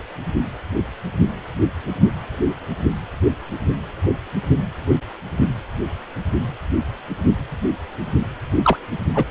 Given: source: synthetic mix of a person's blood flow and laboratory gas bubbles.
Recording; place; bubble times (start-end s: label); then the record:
Doppler ultrasound of blood flow; precordium
8.63-8.79 s: bubbles
9.14-9.24 s: bubbles
From the record:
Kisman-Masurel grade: 113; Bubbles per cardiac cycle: 1 to 2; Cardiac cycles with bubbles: 1 to 10%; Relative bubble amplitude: loud (0.450 to 0.775); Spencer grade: 1 (occasional bubble signal discernible with the cardiac motion signal, with majority of cardiac periods free of bubbles); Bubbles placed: anywhere in the cardiac cycle